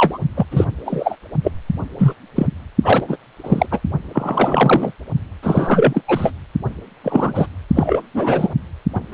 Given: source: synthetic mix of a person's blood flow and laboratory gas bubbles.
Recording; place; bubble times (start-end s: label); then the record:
Doppler ultrasound of blood flow; precordium
0.00-0.18 s: bubbles
0.35-0.46 s: bubbles
0.51-0.67 s: bubbles
0.85-1.16 s: bubbles
1.44-1.52 s: bubbles
1.98-2.13 s: bubbles
2.35-2.46 s: bubbles
2.83-3.05 s: bubbles
3.08-3.17 s: bubbles
3.43-3.67 s: bubbles
3.71-3.80 s: bubbles
4.13-4.92 s: bubbles
5.42-6.02 s: bubbles
6.08-6.31 s: bubbles
7.04-7.47 s: bubbles
7.74-8.02 s: bubbles
8.14-8.53 s: bubbles
8.95-9.00 s: bubbles
9.12-9.14 s: bubbles
From the record:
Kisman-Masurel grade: 243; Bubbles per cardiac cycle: several, 3 to 8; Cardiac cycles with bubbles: 100%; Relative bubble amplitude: loud (0.450 to 0.775); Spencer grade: 3 (all of the cardiac periods contain showers or single bubble signals, but not dominating or overriding the cardiac motion signals); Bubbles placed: only in the low amplitude regions of the cardiac cycle